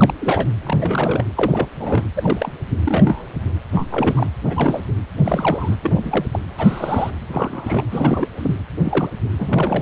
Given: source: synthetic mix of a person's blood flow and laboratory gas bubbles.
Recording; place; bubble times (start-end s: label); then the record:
Doppler ultrasound of blood flow; precordium
0.00-0.14 s: bubbles
0.20-0.49 s: bubbles
0.63-1.23 s: bubbles
1.35-1.69 s: bubbles
1.79-2.05 s: bubbles
2.16-2.51 s: bubbles
2.83-3.24 s: bubbles
3.75-3.86 s: bubbles
3.90-4.27 s: bubbles
4.46-4.81 s: bubbles
5.24-5.75 s: bubbles
5.82-6.25 s: bubbles
6.32-6.39 s: bubbles
6.52-7.10 s: bubbles
7.23-7.84 s: bubbles
7.90-8.29 s: bubbles
8.37-8.56 s: bubbles
8.82-9.10 s: bubbles
9.38-9.82 s: bubbles
From the record:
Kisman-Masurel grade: 242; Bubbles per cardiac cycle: several, 3 to 8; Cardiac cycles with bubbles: 100%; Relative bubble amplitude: moderate (0.250 to 0.450); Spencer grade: 3 (all of the cardiac periods contain showers or single bubble signals, but not dominating or overriding the cardiac motion signals); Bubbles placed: anywhere in the cardiac cycle